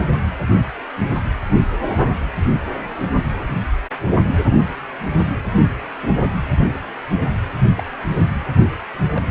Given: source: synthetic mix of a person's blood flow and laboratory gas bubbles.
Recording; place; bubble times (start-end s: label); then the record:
Doppler ultrasound of blood flow; precordium
1.80-1.97 s: bubbles
4.50-4.58 s: bubbles
6.02-6.17 s: bubbles
7.75-7.83 s: bubbles
9.14-9.21 s: bubbles
From the record:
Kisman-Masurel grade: 121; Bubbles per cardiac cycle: 1 to 2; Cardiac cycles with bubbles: 10 to 50%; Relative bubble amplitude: barely perceptible (0.100 to 0.250); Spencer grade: 2 (many but less than half of the cardiac periods contain bubble signals, singularly or in groups); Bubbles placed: anywhere in the cardiac cycle